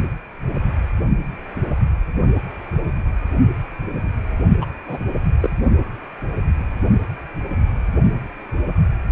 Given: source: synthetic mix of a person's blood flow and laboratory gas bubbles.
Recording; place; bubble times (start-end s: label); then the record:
Doppler ultrasound of blood flow; precordium
4.61-4.65 s: bubbles
4.87-4.99 s: bubbles
5.40-5.50 s: bubbles
From the record:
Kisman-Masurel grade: 212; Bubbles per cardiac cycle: several, 3 to 8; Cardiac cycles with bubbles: 1 to 10%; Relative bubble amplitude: moderate (0.250 to 0.450); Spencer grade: 1 (occasional bubble signal discernible with the cardiac motion signal, with majority of cardiac periods free of bubbles); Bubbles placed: only in the low amplitude regions of the cardiac cycle